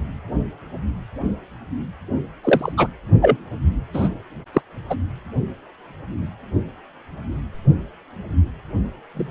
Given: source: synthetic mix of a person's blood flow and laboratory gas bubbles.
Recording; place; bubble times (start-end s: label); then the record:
Doppler ultrasound of blood flow; precordium
2.44-2.73 s: bubbles
2.77-2.87 s: bubbles
3.21-3.37 s: bubbles
3.93-4.08 s: bubbles
4.53-4.61 s: bubbles
4.89-4.95 s: bubbles
9.14-9.31 s: bubbles
From the record:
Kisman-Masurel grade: 123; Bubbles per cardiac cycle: 1 to 2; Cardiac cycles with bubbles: 10 to 50%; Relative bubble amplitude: loud (0.450 to 0.775); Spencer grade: 2 (many but less than half of the cardiac periods contain bubble signals, singularly or in groups); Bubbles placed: only in the low amplitude regions of the cardiac cycle